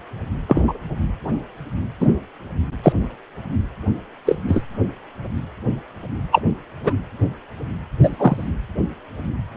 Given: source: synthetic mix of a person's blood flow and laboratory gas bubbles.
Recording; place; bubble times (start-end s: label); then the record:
Doppler ultrasound of blood flow; precordium
0.48-0.63 s: bubbles
0.67-0.73 s: bubbles
2.00-2.08 s: bubbles
2.83-2.93 s: bubbles
4.25-4.37 s: bubbles
4.48-4.63 s: bubbles
6.32-6.42 s: bubbles
6.83-6.93 s: bubbles
8.02-8.49 s: bubbles
From the record:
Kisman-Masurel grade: 123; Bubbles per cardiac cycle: 1 to 2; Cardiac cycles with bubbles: 10 to 50%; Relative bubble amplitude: loud (0.450 to 0.775); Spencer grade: 2 (many but less than half of the cardiac periods contain bubble signals, singularly or in groups); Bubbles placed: anywhere in the cardiac cycle